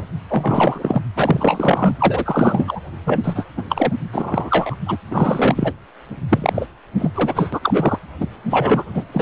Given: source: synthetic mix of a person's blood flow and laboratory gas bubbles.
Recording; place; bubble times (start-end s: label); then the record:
Doppler ultrasound of blood flow; precordium
0.00-0.03 s: bubbles
0.30-1.02 s: bubbles
1.17-1.97 s: bubbles
2.00-2.80 s: bubbles
3.06-3.21 s: bubbles
3.24-3.46 s: bubbles
3.57-3.63 s: bubbles
3.69-3.93 s: bubbles
4.12-4.75 s: bubbles
4.86-4.96 s: bubbles
5.11-5.73 s: bubbles
6.29-6.66 s: bubbles
6.99-7.11 s: bubbles
7.14-7.59 s: bubbles
7.63-7.99 s: bubbles
8.21-8.27 s: bubbles
8.49-8.83 s: bubbles
8.94-9.03 s: bubbles
9.12-9.22 s: bubbles
From the record:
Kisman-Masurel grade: 343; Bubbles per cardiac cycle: rolling drumbeat, 9 or more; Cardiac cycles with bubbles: 100%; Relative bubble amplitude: loud (0.450 to 0.775); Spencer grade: 3 (all of the cardiac periods contain showers or single bubble signals, but not dominating or overriding the cardiac motion signals); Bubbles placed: anywhere in the cardiac cycle